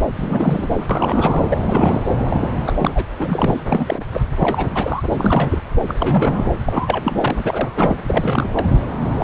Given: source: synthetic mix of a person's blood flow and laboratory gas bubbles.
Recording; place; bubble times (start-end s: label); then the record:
Doppler ultrasound of blood flow; subclavian vein
0.14-0.87 s: bubbles
0.90-1.45 s: bubbles
1.50-1.63 s: bubbles
1.66-2.00 s: bubbles
2.28-2.48 s: bubbles
2.65-3.03 s: bubbles
3.10-3.13 s: bubbles
3.19-3.62 s: bubbles
3.68-4.02 s: bubbles
4.13-4.21 s: bubbles
4.39-5.02 s: bubbles
5.10-5.58 s: bubbles
5.88-5.95 s: bubbles
5.99-6.50 s: bubbles
6.65-7.96 s: bubbles
8.07-8.49 s: bubbles
8.52-8.65 s: bubbles
9.01-9.24 s: bubbles
From the record:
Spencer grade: 3 (all of the cardiac periods contain showers or single bubble signals, but not dominating or overriding the cardiac motion signals); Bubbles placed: anywhere in the cardiac cycle